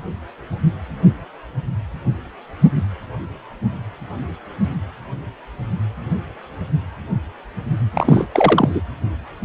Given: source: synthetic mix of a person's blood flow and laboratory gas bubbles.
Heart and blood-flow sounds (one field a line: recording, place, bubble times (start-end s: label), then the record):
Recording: Doppler ultrasound of blood flow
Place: precordium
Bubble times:
7.93-8.27 s: bubbles
8.33-8.81 s: bubbles
From the record:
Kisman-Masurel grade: 213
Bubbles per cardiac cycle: several, 3 to 8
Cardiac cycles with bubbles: 1 to 10%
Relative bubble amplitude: loud (0.450 to 0.775)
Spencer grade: 1 (occasional bubble signal discernible with the cardiac motion signal, with majority of cardiac periods free of bubbles)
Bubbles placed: anywhere in the cardiac cycle